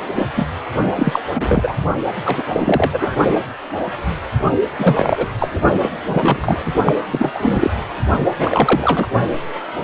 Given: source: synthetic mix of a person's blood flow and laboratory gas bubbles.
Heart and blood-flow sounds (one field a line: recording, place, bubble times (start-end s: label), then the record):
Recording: Doppler ultrasound of blood flow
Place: precordium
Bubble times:
0.15-0.28 s: bubbles
0.36-0.45 s: bubbles
0.95-1.20 s: bubbles
1.30-1.74 s: bubbles
2.25-2.44 s: bubbles
2.52-3.16 s: bubbles
4.79-5.27 s: bubbles
5.40-5.61 s: bubbles
5.82-5.90 s: bubbles
6.06-6.62 s: bubbles
6.65-6.73 s: bubbles
6.86-6.93 s: bubbles
7.11-7.31 s: bubbles
7.34-7.70 s: bubbles
8.38-9.07 s: bubbles
From the record:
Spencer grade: 3 (all of the cardiac periods contain showers or single bubble signals, but not dominating or overriding the cardiac motion signals)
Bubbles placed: only in the low amplitude regions of the cardiac cycle